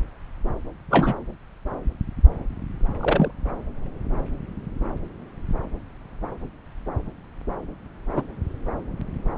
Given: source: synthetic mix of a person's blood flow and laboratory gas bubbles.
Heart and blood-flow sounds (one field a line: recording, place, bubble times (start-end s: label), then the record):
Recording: Doppler ultrasound of blood flow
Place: subclavian vein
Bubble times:
0.90-1.14 s: bubbles
2.99-3.31 s: bubbles
8.13-8.22 s: bubbles
From the record:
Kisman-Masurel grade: 122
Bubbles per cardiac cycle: 1 to 2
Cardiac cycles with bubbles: 10 to 50%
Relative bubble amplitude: moderate (0.250 to 0.450)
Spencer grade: 2 (many but less than half of the cardiac periods contain bubble signals, singularly or in groups)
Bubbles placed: anywhere in the cardiac cycle